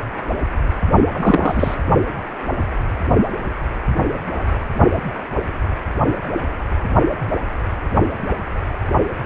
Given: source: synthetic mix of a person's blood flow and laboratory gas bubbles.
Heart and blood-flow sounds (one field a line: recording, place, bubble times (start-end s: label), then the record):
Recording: Doppler ultrasound of blood flow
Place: precordium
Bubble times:
1.12-1.75 s: bubbles
From the record:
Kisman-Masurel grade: 223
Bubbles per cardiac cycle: several, 3 to 8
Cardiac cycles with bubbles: 10 to 50%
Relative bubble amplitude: loud (0.450 to 0.775)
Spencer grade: 2 (many but less than half of the cardiac periods contain bubble signals, singularly or in groups)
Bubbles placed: only in the low amplitude regions of the cardiac cycle